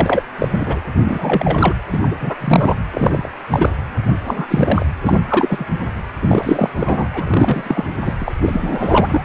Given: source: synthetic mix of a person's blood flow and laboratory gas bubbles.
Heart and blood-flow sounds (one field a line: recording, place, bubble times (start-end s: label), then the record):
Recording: Doppler ultrasound of blood flow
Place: precordium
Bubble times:
0.00-0.23 s: bubbles
0.39-0.48 s: bubbles
0.52-0.80 s: bubbles
1.04-1.74 s: bubbles
1.89-1.99 s: bubbles
2.01-2.15 s: bubbles
2.19-2.36 s: bubbles
2.40-2.74 s: bubbles
2.91-3.29 s: bubbles
3.51-3.79 s: bubbles
4.24-4.86 s: bubbles
5.01-5.21 s: bubbles
5.29-5.65 s: bubbles
6.22-6.70 s: bubbles
6.76-7.08 s: bubbles
7.12-7.84 s: bubbles
8.04-8.13 s: bubbles
8.20-8.35 s: bubbles
8.40-9.23 s: bubbles
From the record:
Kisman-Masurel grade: 343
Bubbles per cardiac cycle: rolling drumbeat, 9 or more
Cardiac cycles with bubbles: 100%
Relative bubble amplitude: loud (0.450 to 0.775)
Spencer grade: 3 (all of the cardiac periods contain showers or single bubble signals, but not dominating or overriding the cardiac motion signals)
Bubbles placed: anywhere in the cardiac cycle